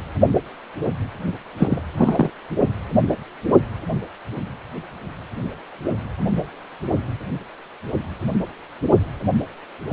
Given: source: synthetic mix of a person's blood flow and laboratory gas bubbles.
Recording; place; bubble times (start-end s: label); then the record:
Doppler ultrasound of blood flow; precordium
1.57-1.81 s: bubbles
1.97-2.30 s: bubbles
From the record:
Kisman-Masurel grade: 213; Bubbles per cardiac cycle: several, 3 to 8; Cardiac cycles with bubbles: 1 to 10%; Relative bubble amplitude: loud (0.450 to 0.775); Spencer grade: 1 (occasional bubble signal discernible with the cardiac motion signal, with majority of cardiac periods free of bubbles); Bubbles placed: only in the low amplitude regions of the cardiac cycle